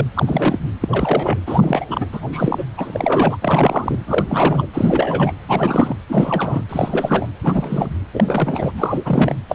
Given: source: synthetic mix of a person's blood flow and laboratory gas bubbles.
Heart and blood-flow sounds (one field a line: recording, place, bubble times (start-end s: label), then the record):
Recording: Doppler ultrasound of blood flow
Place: precordium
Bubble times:
0.00-0.07 s: bubbles
0.14-0.58 s: bubbles
0.81-0.88 s: bubbles
0.91-1.39 s: bubbles
1.46-1.85 s: bubbles
1.91-2.06 s: bubbles
2.12-2.65 s: bubbles
2.77-3.36 s: bubbles
3.42-3.99 s: bubbles
4.05-4.67 s: bubbles
4.73-5.32 s: bubbles
5.48-5.96 s: bubbles
6.09-6.63 s: bubbles
6.69-7.29 s: bubbles
7.42-7.89 s: bubbles
8.13-8.72 s: bubbles
8.76-9.37 s: bubbles
9.48-9.54 s: bubbles
From the record:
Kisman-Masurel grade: 343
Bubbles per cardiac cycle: rolling drumbeat, 9 or more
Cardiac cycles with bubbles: 100%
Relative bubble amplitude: loud (0.450 to 0.775)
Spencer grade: 3 (all of the cardiac periods contain showers or single bubble signals, but not dominating or overriding the cardiac motion signals)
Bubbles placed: anywhere in the cardiac cycle